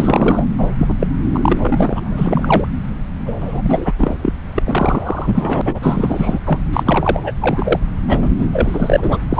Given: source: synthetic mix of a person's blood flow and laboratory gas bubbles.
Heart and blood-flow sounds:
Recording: Doppler ultrasound of blood flow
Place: subclavian vein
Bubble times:
0.00-0.46 s: bubbles
0.58-0.70 s: bubbles
0.78-0.95 s: bubbles
1.00-1.07 s: bubbles
1.32-2.67 s: bubbles
3.25-3.32 s: bubbles
3.40-3.94 s: bubbles
3.98-4.16 s: bubbles
4.21-4.33 s: bubbles
4.56-5.62 s: bubbles
5.65-5.79 s: bubbles
5.82-6.40 s: bubbles
6.45-6.58 s: bubbles
6.73-7.20 s: bubbles
7.23-7.33 s: bubbles
7.40-7.79 s: bubbles
8.07-8.29 s: bubbles
8.39-8.46 s: bubbles
8.52-9.17 s: bubbles
9.30-9.40 s: bubbles
From the record:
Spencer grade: 3 (all of the cardiac periods contain showers or single bubble signals, but not dominating or overriding the cardiac motion signals)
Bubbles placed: anywhere in the cardiac cycle

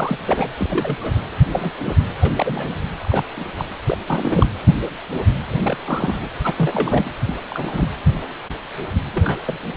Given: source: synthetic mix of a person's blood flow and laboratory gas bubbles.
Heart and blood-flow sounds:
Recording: Doppler ultrasound of blood flow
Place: precordium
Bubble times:
0.00-0.49 s: bubbles
0.59-1.23 s: bubbles
1.51-1.71 s: bubbles
1.84-1.97 s: bubbles
2.21-2.33 s: bubbles
2.35-2.78 s: bubbles
3.02-3.23 s: bubbles
3.37-3.46 s: bubbles
3.55-3.65 s: bubbles
3.86-3.98 s: bubbles
4.07-4.48 s: bubbles
5.64-5.78 s: bubbles
5.86-6.29 s: bubbles
6.44-7.11 s: bubbles
7.25-7.38 s: bubbles
7.50-7.88 s: bubbles
9.13-9.39 s: bubbles
9.45-9.57 s: bubbles
9.64-9.72 s: bubbles
From the record:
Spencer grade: 3 (all of the cardiac periods contain showers or single bubble signals, but not dominating or overriding the cardiac motion signals)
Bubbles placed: anywhere in the cardiac cycle

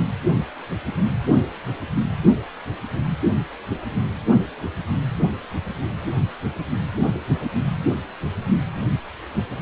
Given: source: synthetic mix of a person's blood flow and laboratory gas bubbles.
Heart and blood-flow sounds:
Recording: Doppler ultrasound of blood flow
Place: precordium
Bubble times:
no bubbles
From the record:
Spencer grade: 0 (complete lack of bubble signals)

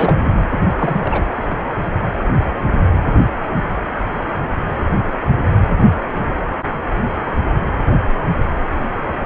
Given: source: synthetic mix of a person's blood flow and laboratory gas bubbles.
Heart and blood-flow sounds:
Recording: Doppler ultrasound of blood flow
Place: precordium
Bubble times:
0.00-0.26 s: bubbles
0.52-0.58 s: bubbles
0.78-1.26 s: bubbles
From the record:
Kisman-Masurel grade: 222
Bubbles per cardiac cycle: several, 3 to 8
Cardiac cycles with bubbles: 10 to 50%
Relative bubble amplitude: moderate (0.250 to 0.450)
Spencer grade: 2 (many but less than half of the cardiac periods contain bubble signals, singularly or in groups)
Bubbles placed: anywhere in the cardiac cycle

